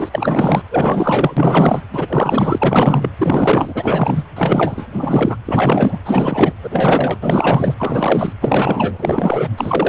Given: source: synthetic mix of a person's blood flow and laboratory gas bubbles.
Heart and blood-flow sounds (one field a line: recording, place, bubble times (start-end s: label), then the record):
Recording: Doppler ultrasound of blood flow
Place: precordium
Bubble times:
0.00-0.09 s: bubbles
0.12-0.62 s: bubbles
0.71-1.34 s: bubbles
1.36-1.81 s: bubbles
1.93-3.10 s: bubbles
3.19-4.24 s: bubbles
4.35-4.86 s: bubbles
4.92-5.36 s: bubbles
5.45-5.99 s: bubbles
6.05-6.52 s: bubbles
6.63-7.17 s: bubbles
7.21-7.74 s: bubbles
7.79-8.32 s: bubbles
8.40-9.49 s: bubbles
9.56-9.89 s: bubbles
From the record:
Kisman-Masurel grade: 444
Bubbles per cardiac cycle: continuous sound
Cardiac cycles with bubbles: 100%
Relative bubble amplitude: maximal (0.775 to 0.999)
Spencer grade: 4 (maximum detectable bubble signal sounding continuously throughout systole and diastole of every cardiac period, and overriding the amplitude of the normal cardiac signals)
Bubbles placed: anywhere in the cardiac cycle